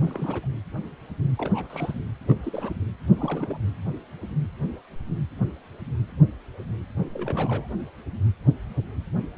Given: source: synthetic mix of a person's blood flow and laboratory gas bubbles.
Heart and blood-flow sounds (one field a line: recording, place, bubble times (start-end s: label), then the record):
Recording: Doppler ultrasound of blood flow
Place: precordium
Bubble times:
0.00-0.47 s: bubbles
1.38-1.94 s: bubbles
2.27-2.76 s: bubbles
3.16-3.57 s: bubbles
7.13-7.68 s: bubbles
From the record:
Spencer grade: 2 (many but less than half of the cardiac periods contain bubble signals, singularly or in groups)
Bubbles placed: anywhere in the cardiac cycle